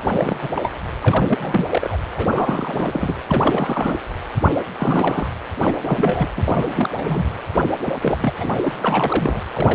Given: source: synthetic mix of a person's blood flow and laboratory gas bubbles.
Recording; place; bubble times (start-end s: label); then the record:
Doppler ultrasound of blood flow; precordium
0.14-0.36 s: bubbles
0.41-0.50 s: bubbles
0.54-0.72 s: bubbles
1.01-1.67 s: bubbles
1.69-1.97 s: bubbles
2.17-3.15 s: bubbles
3.28-3.98 s: bubbles
4.77-5.28 s: bubbles
5.62-5.76 s: bubbles
5.85-6.31 s: bubbles
6.36-6.42 s: bubbles
6.46-6.89 s: bubbles
6.93-7.25 s: bubbles
7.84-7.93 s: bubbles
8.03-8.33 s: bubbles
8.39-8.49 s: bubbles
8.55-8.73 s: bubbles
8.79-9.40 s: bubbles
9.54-9.75 s: bubbles
From the record:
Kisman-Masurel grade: 342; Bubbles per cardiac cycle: rolling drumbeat, 9 or more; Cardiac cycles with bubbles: 100%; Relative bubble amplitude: moderate (0.250 to 0.450); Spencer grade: 3 (all of the cardiac periods contain showers or single bubble signals, but not dominating or overriding the cardiac motion signals); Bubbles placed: anywhere in the cardiac cycle